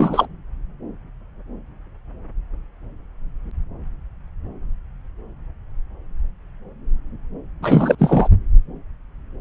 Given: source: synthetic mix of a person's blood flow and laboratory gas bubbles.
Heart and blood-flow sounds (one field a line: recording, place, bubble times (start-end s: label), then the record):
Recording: Doppler ultrasound of blood flow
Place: subclavian vein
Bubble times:
0.00-0.28 s: bubbles
7.62-7.95 s: bubbles
7.98-8.28 s: bubbles
From the record:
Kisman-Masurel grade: 223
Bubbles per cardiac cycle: several, 3 to 8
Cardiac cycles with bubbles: 10 to 50%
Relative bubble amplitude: loud (0.450 to 0.775)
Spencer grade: 2 (many but less than half of the cardiac periods contain bubble signals, singularly or in groups)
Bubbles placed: anywhere in the cardiac cycle